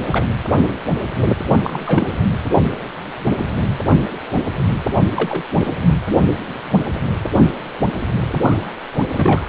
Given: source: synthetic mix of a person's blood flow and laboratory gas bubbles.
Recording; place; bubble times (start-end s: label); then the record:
Doppler ultrasound of blood flow; precordium
0.05-0.25 s: bubbles
1.48-1.60 s: bubbles
1.64-2.08 s: bubbles
5.16-5.43 s: bubbles
5.60-5.75 s: bubbles
8.34-8.74 s: bubbles
9.16-9.46 s: bubbles
From the record:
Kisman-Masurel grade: 222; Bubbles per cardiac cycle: several, 3 to 8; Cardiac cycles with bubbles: 10 to 50%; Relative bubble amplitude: moderate (0.250 to 0.450); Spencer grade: 2 (many but less than half of the cardiac periods contain bubble signals, singularly or in groups); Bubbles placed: anywhere in the cardiac cycle